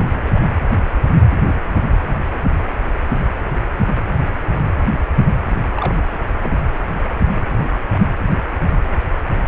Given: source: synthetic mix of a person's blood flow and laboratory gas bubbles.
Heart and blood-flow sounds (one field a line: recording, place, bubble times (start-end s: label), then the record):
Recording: Doppler ultrasound of blood flow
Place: precordium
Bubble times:
0.00-0.21 s: bubbles
0.25-0.41 s: bubbles
5.74-6.05 s: bubbles
6.42-6.53 s: bubbles
From the record:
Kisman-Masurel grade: 211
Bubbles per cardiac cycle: several, 3 to 8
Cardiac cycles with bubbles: 1 to 10%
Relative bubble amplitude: barely perceptible (0.100 to 0.250)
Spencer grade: 1 (occasional bubble signal discernible with the cardiac motion signal, with majority of cardiac periods free of bubbles)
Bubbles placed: anywhere in the cardiac cycle